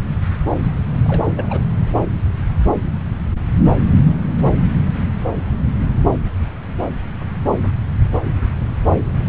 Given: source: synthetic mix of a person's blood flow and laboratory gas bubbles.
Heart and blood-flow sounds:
Doppler ultrasound of blood flow; subclavian vein
1.06-1.24 s: bubbles
1.35-1.63 s: bubbles
From the record:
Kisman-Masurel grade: 211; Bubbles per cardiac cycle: several, 3 to 8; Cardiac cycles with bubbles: 1 to 10%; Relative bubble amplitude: barely perceptible (0.100 to 0.250); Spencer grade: 1 (occasional bubble signal discernible with the cardiac motion signal, with majority of cardiac periods free of bubbles); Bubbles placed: anywhere in the cardiac cycle

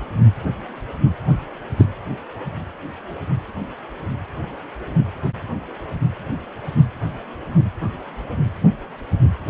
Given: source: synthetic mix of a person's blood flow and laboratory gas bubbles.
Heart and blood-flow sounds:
Doppler ultrasound of blood flow; precordium
1.78-1.87 s: bubbles
From the record:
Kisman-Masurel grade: 113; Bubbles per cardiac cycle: 1 to 2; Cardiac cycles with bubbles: 1 to 10%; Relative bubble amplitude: loud (0.450 to 0.775); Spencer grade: 1 (occasional bubble signal discernible with the cardiac motion signal, with majority of cardiac periods free of bubbles); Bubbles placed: anywhere in the cardiac cycle

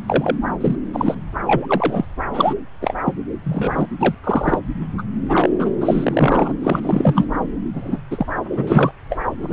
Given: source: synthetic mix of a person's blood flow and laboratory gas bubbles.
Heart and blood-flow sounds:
Doppler ultrasound of blood flow; subclavian vein
0.06-0.36 s: bubbles
0.60-0.76 s: bubbles
0.94-1.15 s: bubbles
1.47-1.66 s: bubbles
1.68-2.05 s: bubbles
2.33-2.55 s: bubbles
2.82-2.94 s: bubbles
3.05-3.13 s: bubbles
3.43-3.86 s: bubbles
3.99-4.15 s: bubbles
4.24-4.58 s: bubbles
4.98-5.03 s: bubbles
5.29-5.50 s: bubbles
5.58-5.71 s: bubbles
5.81-6.53 s: bubbles
6.63-7.25 s: bubbles
7.74-8.00 s: bubbles
8.10-8.26 s: bubbles
8.52-8.91 s: bubbles
9.09-9.18 s: bubbles
9.40-9.53 s: bubbles
From the record:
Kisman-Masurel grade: 243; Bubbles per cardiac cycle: several, 3 to 8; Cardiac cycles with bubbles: 100%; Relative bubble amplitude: loud (0.450 to 0.775); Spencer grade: 3 (all of the cardiac periods contain showers or single bubble signals, but not dominating or overriding the cardiac motion signals); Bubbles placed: anywhere in the cardiac cycle

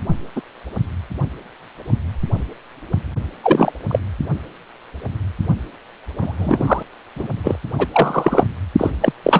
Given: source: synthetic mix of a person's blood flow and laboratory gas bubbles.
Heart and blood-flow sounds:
Doppler ultrasound of blood flow; precordium
0.36-0.41 s: bubbles
3.43-3.71 s: bubbles
3.88-3.99 s: bubbles
6.20-6.83 s: bubbles
7.16-7.27 s: bubbles
7.43-7.56 s: bubbles
7.78-7.87 s: bubbles
7.92-8.45 s: bubbles
8.78-8.90 s: bubbles
9.01-9.12 s: bubbles
9.22-9.40 s: bubbles
From the record:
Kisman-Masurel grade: 233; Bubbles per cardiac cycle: several, 3 to 8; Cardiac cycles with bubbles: 50 to 99%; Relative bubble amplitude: loud (0.450 to 0.775); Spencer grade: 3 (all of the cardiac periods contain showers or single bubble signals, but not dominating or overriding the cardiac motion signals); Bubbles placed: only in the low amplitude regions of the cardiac cycle

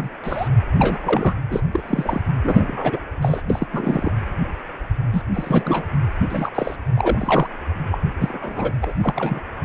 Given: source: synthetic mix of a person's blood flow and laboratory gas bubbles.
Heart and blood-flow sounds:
Doppler ultrasound of blood flow; precordium
0.00-0.09 s: bubbles
0.24-0.48 s: bubbles
0.77-1.35 s: bubbles
1.50-1.61 s: bubbles
1.73-2.21 s: bubbles
2.42-3.00 s: bubbles
3.21-3.42 s: bubbles
3.50-3.67 s: bubbles
3.72-4.12 s: bubbles
5.12-5.22 s: bubbles
5.33-5.86 s: bubbles
6.29-6.50 s: bubbles
6.54-6.76 s: bubbles
6.94-7.48 s: bubbles
7.91-7.99 s: bubbles
8.19-8.72 s: bubbles
8.82-9.42 s: bubbles
From the record:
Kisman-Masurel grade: 232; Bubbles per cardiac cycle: several, 3 to 8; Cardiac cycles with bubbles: 50 to 99%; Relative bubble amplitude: moderate (0.250 to 0.450); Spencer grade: 3 (all of the cardiac periods contain showers or single bubble signals, but not dominating or overriding the cardiac motion signals); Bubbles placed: anywhere in the cardiac cycle

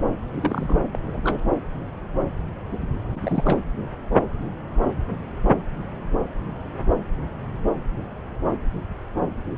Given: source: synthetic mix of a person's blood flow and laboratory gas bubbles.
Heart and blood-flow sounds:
Doppler ultrasound of blood flow; subclavian vein
0.34-0.84 s: bubbles
0.93-0.99 s: bubbles
1.12-1.40 s: bubbles
3.16-3.59 s: bubbles
From the record:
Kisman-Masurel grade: 222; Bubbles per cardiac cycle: several, 3 to 8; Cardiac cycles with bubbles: 10 to 50%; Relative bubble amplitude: moderate (0.250 to 0.450); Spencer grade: 2 (many but less than half of the cardiac periods contain bubble signals, singularly or in groups); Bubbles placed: anywhere in the cardiac cycle

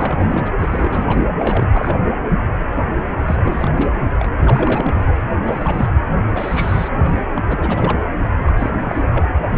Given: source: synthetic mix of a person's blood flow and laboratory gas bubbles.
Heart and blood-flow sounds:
Doppler ultrasound of blood flow; precordium
0.00-0.49 s: bubbles
0.59-1.27 s: bubbles
1.39-2.07 s: bubbles
3.27-3.69 s: bubbles
3.73-3.92 s: bubbles
4.19-4.30 s: bubbles
4.37-5.14 s: bubbles
5.41-5.90 s: bubbles
6.29-6.90 s: bubbles
6.97-7.30 s: bubbles
7.36-7.42 s: bubbles
7.48-7.99 s: bubbles
8.42-8.71 s: bubbles
8.84-9.04 s: bubbles
9.12-9.29 s: bubbles
From the record:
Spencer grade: 3 (all of the cardiac periods contain showers or single bubble signals, but not dominating or overriding the cardiac motion signals); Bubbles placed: anywhere in the cardiac cycle

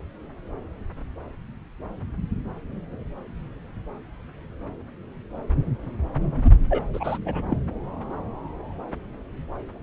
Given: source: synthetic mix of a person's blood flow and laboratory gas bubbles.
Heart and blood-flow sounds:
Doppler ultrasound of blood flow; subclavian vein
6.44-6.50 s: bubbles
6.70-6.82 s: bubbles
6.93-7.18 s: bubbles
7.25-7.42 s: bubbles
7.50-7.57 s: bubbles
From the record:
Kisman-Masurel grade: 213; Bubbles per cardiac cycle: several, 3 to 8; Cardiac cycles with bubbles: 1 to 10%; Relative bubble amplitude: loud (0.450 to 0.775); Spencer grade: 1 (occasional bubble signal discernible with the cardiac motion signal, with majority of cardiac periods free of bubbles); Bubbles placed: anywhere in the cardiac cycle

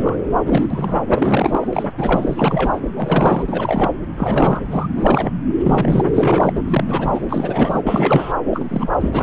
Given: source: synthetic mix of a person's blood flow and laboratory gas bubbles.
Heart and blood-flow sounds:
Doppler ultrasound of blood flow; subclavian vein
0.00-0.17 s: bubbles
0.46-1.01 s: bubbles
1.10-1.67 s: bubbles
1.73-1.92 s: bubbles
1.98-2.81 s: bubbles
2.96-3.44 s: bubbles
3.47-3.91 s: bubbles
4.16-4.66 s: bubbles
4.71-4.87 s: bubbles
4.95-5.31 s: bubbles
5.63-6.53 s: bubbles
6.55-6.62 s: bubbles
6.69-7.22 s: bubbles
7.29-7.82 s: bubbles
7.86-8.33 s: bubbles
8.46-8.64 s: bubbles
8.69-8.89 s: bubbles
9.01-9.23 s: bubbles
From the record:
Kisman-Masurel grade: 342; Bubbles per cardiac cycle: rolling drumbeat, 9 or more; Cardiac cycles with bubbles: 100%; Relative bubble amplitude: moderate (0.250 to 0.450); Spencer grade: 3 (all of the cardiac periods contain showers or single bubble signals, but not dominating or overriding the cardiac motion signals); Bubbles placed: anywhere in the cardiac cycle

